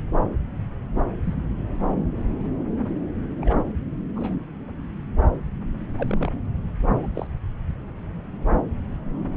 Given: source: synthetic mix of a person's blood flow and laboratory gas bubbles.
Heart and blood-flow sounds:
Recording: Doppler ultrasound of blood flow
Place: subclavian vein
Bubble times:
1.25-1.34 s: bubbles
3.41-3.65 s: bubbles
4.15-4.39 s: bubbles
5.97-6.29 s: bubbles
6.95-7.06 s: bubbles
7.15-7.27 s: bubbles
From the record:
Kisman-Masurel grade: 121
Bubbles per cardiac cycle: 1 to 2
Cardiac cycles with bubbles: 10 to 50%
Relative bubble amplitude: barely perceptible (0.100 to 0.250)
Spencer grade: 2 (many but less than half of the cardiac periods contain bubble signals, singularly or in groups)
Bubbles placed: anywhere in the cardiac cycle

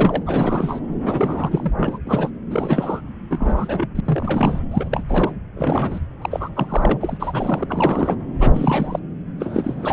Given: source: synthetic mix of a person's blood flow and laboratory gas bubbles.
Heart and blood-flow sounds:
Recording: Doppler ultrasound of blood flow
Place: subclavian vein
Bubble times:
0.00-0.23 s: bubbles
0.26-0.80 s: bubbles
1.04-1.72 s: bubbles
1.76-1.98 s: bubbles
2.06-2.30 s: bubbles
2.50-3.01 s: bubbles
3.30-3.87 s: bubbles
3.95-4.00 s: bubbles
4.04-4.60 s: bubbles
4.71-4.88 s: bubbles
4.92-5.03 s: bubbles
5.08-5.32 s: bubbles
5.56-6.00 s: bubbles
6.21-6.49 s: bubbles
6.56-6.97 s: bubbles
7.00-7.66 s: bubbles
7.68-8.16 s: bubbles
8.39-8.99 s: bubbles
9.38-9.93 s: bubbles
From the record:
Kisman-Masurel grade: 342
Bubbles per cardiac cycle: rolling drumbeat, 9 or more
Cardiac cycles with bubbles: 100%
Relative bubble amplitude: moderate (0.250 to 0.450)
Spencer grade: 3 (all of the cardiac periods contain showers or single bubble signals, but not dominating or overriding the cardiac motion signals)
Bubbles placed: anywhere in the cardiac cycle

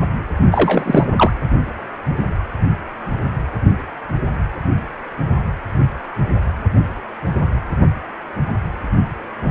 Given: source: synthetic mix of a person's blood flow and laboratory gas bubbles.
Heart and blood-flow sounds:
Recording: Doppler ultrasound of blood flow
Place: precordium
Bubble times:
0.52-1.07 s: bubbles
1.16-1.31 s: bubbles
From the record:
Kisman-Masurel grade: 223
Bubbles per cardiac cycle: several, 3 to 8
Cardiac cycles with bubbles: 10 to 50%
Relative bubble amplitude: loud (0.450 to 0.775)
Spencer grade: 2 (many but less than half of the cardiac periods contain bubble signals, singularly or in groups)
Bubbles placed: anywhere in the cardiac cycle

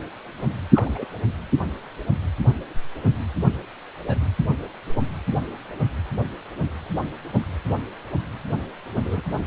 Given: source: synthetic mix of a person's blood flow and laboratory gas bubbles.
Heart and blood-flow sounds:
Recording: Doppler ultrasound of blood flow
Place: precordium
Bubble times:
0.73-1.06 s: bubbles
4.08-4.15 s: bubbles
8.93-9.22 s: bubbles
From the record:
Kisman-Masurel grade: 121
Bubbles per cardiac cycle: 1 to 2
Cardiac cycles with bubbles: 10 to 50%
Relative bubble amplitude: barely perceptible (0.100 to 0.250)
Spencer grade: 2 (many but less than half of the cardiac periods contain bubble signals, singularly or in groups)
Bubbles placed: anywhere in the cardiac cycle

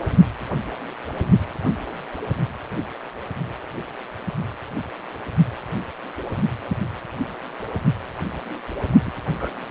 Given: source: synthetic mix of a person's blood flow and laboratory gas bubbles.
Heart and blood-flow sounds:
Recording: Doppler ultrasound of blood flow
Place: precordium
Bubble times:
9.05-9.12 s: bubbles
9.35-9.49 s: bubbles
From the record:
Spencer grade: 2 (many but less than half of the cardiac periods contain bubble signals, singularly or in groups)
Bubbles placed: only in the low amplitude regions of the cardiac cycle

